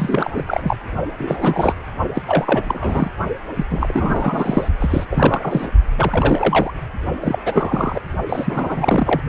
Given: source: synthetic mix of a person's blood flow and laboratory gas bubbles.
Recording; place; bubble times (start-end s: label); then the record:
Doppler ultrasound of blood flow; precordium
0.00-0.30 s: bubbles
0.36-0.76 s: bubbles
1.19-1.73 s: bubbles
2.15-2.23 s: bubbles
2.26-2.62 s: bubbles
2.67-3.10 s: bubbles
3.56-3.65 s: bubbles
3.70-4.68 s: bubbles
4.79-5.06 s: bubbles
5.11-5.70 s: bubbles
5.96-6.72 s: bubbles
7.21-7.39 s: bubbles
7.45-8.01 s: bubbles
8.29-9.21 s: bubbles
From the record:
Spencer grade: 3 (all of the cardiac periods contain showers or single bubble signals, but not dominating or overriding the cardiac motion signals); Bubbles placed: only in the low amplitude regions of the cardiac cycle